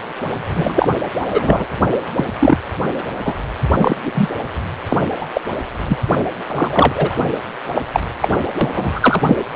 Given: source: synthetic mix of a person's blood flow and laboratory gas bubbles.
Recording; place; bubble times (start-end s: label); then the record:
Doppler ultrasound of blood flow; precordium
0.55-0.88 s: bubbles
1.18-1.66 s: bubbles
2.15-2.24 s: bubbles
2.39-2.58 s: bubbles
3.24-3.34 s: bubbles
3.79-3.96 s: bubbles
4.05-4.29 s: bubbles
4.89-4.98 s: bubbles
5.21-5.27 s: bubbles
5.34-5.41 s: bubbles
5.87-5.98 s: bubbles
6.48-7.15 s: bubbles
7.75-7.83 s: bubbles
7.92-8.00 s: bubbles
8.21-8.28 s: bubbles
8.61-9.22 s: bubbles
9.27-9.38 s: bubbles
From the record:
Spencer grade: 3 (all of the cardiac periods contain showers or single bubble signals, but not dominating or overriding the cardiac motion signals); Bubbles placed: anywhere in the cardiac cycle